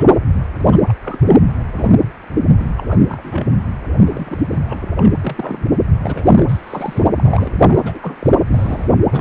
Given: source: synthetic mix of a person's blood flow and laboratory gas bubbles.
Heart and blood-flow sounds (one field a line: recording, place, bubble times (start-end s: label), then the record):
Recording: Doppler ultrasound of blood flow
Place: precordium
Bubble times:
0.00-0.06 s: bubbles
0.33-0.42 s: bubbles
0.59-0.65 s: bubbles
0.72-0.77 s: bubbles
0.88-0.93 s: bubbles
1.03-1.18 s: bubbles
1.24-1.43 s: bubbles
1.76-1.99 s: bubbles
2.35-2.42 s: bubbles
2.59-2.66 s: bubbles
2.77-2.84 s: bubbles
2.88-3.04 s: bubbles
3.08-3.69 s: bubbles
4.05-4.42 s: bubbles
4.50-4.57 s: bubbles
4.66-4.89 s: bubbles
4.96-5.15 s: bubbles
5.21-5.71 s: bubbles
6.03-7.05 s: bubbles
7.16-7.82 s: bubbles
7.85-7.99 s: bubbles
8.02-8.16 s: bubbles
8.19-8.30 s: bubbles
8.46-8.94 s: bubbles
9.12-9.21 s: bubbles
From the record:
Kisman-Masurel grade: 242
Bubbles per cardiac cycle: several, 3 to 8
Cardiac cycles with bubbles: 100%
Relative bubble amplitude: moderate (0.250 to 0.450)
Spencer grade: 3 (all of the cardiac periods contain showers or single bubble signals, but not dominating or overriding the cardiac motion signals)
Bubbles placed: anywhere in the cardiac cycle